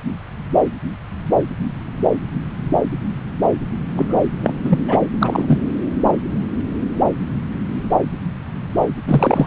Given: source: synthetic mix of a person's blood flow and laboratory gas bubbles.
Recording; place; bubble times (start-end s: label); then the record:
Doppler ultrasound of blood flow; subclavian vein
3.96-4.18 s: bubbles
4.43-4.54 s: bubbles
4.64-4.79 s: bubbles
4.88-4.97 s: bubbles
5.21-5.58 s: bubbles
9.07-9.47 s: bubbles
From the record:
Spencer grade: 2 (many but less than half of the cardiac periods contain bubble signals, singularly or in groups); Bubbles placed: anywhere in the cardiac cycle